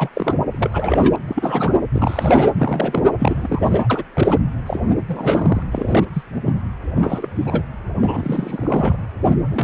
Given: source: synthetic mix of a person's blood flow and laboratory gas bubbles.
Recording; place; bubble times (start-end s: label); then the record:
Doppler ultrasound of blood flow; precordium
0.00-0.09 s: bubbles
0.14-0.36 s: bubbles
0.50-1.16 s: bubbles
1.27-1.74 s: bubbles
1.93-3.02 s: bubbles
3.19-3.87 s: bubbles
3.90-4.03 s: bubbles
4.13-4.38 s: bubbles
4.66-4.80 s: bubbles
5.06-5.62 s: bubbles
5.71-6.06 s: bubbles
6.13-6.23 s: bubbles
6.31-6.39 s: bubbles
6.46-6.61 s: bubbles
6.95-7.63 s: bubbles
8.00-8.96 s: bubbles
9.49-9.64 s: bubbles
From the record:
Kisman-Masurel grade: 332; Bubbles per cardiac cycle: rolling drumbeat, 9 or more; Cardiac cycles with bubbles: 50 to 99%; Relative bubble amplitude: moderate (0.250 to 0.450); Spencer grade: 3 (all of the cardiac periods contain showers or single bubble signals, but not dominating or overriding the cardiac motion signals); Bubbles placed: anywhere in the cardiac cycle